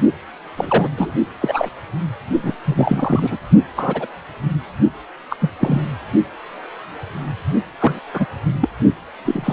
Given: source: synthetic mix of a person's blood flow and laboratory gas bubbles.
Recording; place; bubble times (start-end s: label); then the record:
Doppler ultrasound of blood flow; precordium
0.56-0.89 s: bubbles
0.97-1.14 s: bubbles
1.41-1.69 s: bubbles
2.42-2.52 s: bubbles
2.65-3.37 s: bubbles
3.76-4.07 s: bubbles
5.30-5.36 s: bubbles
5.41-5.50 s: bubbles
5.60-5.82 s: bubbles
7.79-8.00 s: bubbles
8.13-8.26 s: bubbles
8.61-8.69 s: bubbles
9.25-9.53 s: bubbles
From the record:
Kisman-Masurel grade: 233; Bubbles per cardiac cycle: several, 3 to 8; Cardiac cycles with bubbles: 50 to 99%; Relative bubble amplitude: loud (0.450 to 0.775); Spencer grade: 3 (all of the cardiac periods contain showers or single bubble signals, but not dominating or overriding the cardiac motion signals); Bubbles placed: only in the low amplitude regions of the cardiac cycle